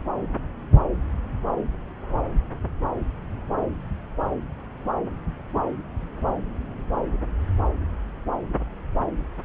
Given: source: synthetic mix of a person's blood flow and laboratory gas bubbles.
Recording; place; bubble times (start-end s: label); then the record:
Doppler ultrasound of blood flow; subclavian vein
no bubbles
From the record:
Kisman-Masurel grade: 000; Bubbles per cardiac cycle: 0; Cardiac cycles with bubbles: 0%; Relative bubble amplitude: no bubbles discernible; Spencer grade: 0 (complete lack of bubble signals)